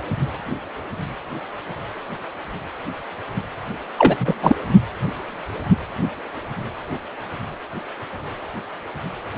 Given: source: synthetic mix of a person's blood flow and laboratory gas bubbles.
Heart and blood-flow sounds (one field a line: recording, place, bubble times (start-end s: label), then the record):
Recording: Doppler ultrasound of blood flow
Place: precordium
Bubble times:
3.98-4.34 s: bubbles
4.42-4.55 s: bubbles
From the record:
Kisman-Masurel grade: 223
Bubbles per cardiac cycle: several, 3 to 8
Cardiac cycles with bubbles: 10 to 50%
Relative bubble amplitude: loud (0.450 to 0.775)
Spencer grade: 2 (many but less than half of the cardiac periods contain bubble signals, singularly or in groups)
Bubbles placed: anywhere in the cardiac cycle